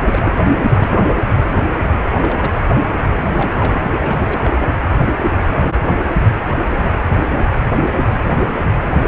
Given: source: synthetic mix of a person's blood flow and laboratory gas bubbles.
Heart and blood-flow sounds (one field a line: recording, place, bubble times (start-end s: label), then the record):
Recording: Doppler ultrasound of blood flow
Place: precordium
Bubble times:
0.08-0.32 s: bubbles
0.45-0.53 s: bubbles
0.69-1.07 s: bubbles
2.13-2.52 s: bubbles
3.32-3.79 s: bubbles
3.98-4.50 s: bubbles
4.55-4.67 s: bubbles
7.85-7.93 s: bubbles
8.11-8.20 s: bubbles
From the record:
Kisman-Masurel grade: 221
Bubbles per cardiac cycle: several, 3 to 8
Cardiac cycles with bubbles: 10 to 50%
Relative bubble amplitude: barely perceptible (0.100 to 0.250)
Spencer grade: 2 (many but less than half of the cardiac periods contain bubble signals, singularly or in groups)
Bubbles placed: anywhere in the cardiac cycle